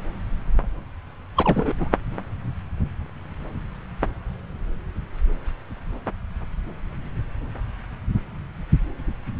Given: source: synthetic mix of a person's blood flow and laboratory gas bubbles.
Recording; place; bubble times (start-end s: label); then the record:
Doppler ultrasound of blood flow; subclavian vein
1.36-1.73 s: bubbles
1.79-1.89 s: bubbles
From the record:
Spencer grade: 1 (occasional bubble signal discernible with the cardiac motion signal, with majority of cardiac periods free of bubbles); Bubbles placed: anywhere in the cardiac cycle